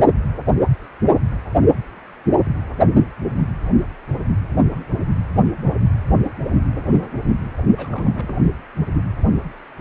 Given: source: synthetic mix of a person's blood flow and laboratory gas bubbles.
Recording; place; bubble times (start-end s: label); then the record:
Doppler ultrasound of blood flow; precordium
7.77-8.42 s: bubbles
From the record:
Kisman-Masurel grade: 211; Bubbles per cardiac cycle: several, 3 to 8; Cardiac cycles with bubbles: 1 to 10%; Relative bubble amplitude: barely perceptible (0.100 to 0.250); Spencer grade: 1 (occasional bubble signal discernible with the cardiac motion signal, with majority of cardiac periods free of bubbles); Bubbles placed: only in the low amplitude regions of the cardiac cycle